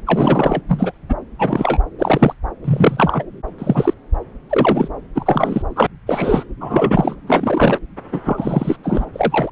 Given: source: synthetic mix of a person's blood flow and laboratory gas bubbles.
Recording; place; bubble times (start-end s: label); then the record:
Doppler ultrasound of blood flow; subclavian vein
0.07-0.61 s: bubbles
0.69-0.92 s: bubbles
1.09-1.15 s: bubbles
1.39-1.79 s: bubbles
1.98-2.33 s: bubbles
2.64-3.23 s: bubbles
3.58-3.94 s: bubbles
4.49-4.89 s: bubbles
5.15-5.62 s: bubbles
5.76-5.87 s: bubbles
6.07-6.44 s: bubbles
6.61-7.16 s: bubbles
7.27-7.79 s: bubbles
8.12-8.21 s: bubbles
8.26-8.77 s: bubbles
8.83-9.05 s: bubbles
9.13-9.52 s: bubbles
From the record:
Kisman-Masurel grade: 243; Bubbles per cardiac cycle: several, 3 to 8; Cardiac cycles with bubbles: 100%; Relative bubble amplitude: loud (0.450 to 0.775); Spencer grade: 3 (all of the cardiac periods contain showers or single bubble signals, but not dominating or overriding the cardiac motion signals); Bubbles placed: anywhere in the cardiac cycle